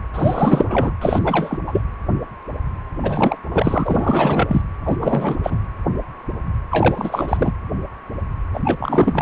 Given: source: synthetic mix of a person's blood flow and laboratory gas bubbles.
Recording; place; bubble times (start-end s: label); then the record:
Doppler ultrasound of blood flow; precordium
0.12-0.92 s: bubbles
1.01-1.59 s: bubbles
1.67-1.81 s: bubbles
3.03-3.38 s: bubbles
3.50-4.62 s: bubbles
4.83-4.97 s: bubbles
5.00-5.36 s: bubbles
5.43-5.57 s: bubbles
6.70-7.53 s: bubbles
8.54-8.60 s: bubbles
8.65-8.77 s: bubbles
8.79-9.21 s: bubbles
From the record:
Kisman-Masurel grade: 333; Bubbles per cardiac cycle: rolling drumbeat, 9 or more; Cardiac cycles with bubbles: 50 to 99%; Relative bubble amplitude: loud (0.450 to 0.775); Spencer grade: 3 (all of the cardiac periods contain showers or single bubble signals, but not dominating or overriding the cardiac motion signals); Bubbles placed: anywhere in the cardiac cycle